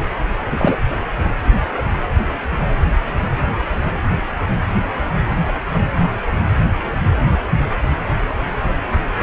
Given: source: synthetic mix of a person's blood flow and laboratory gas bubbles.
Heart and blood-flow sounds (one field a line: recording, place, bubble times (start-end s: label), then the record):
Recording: Doppler ultrasound of blood flow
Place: precordium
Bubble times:
0.50-0.76 s: bubbles
From the record:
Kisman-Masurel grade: 113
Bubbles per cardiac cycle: 1 to 2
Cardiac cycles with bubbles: 1 to 10%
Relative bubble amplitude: loud (0.450 to 0.775)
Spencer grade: 1 (occasional bubble signal discernible with the cardiac motion signal, with majority of cardiac periods free of bubbles)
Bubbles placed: anywhere in the cardiac cycle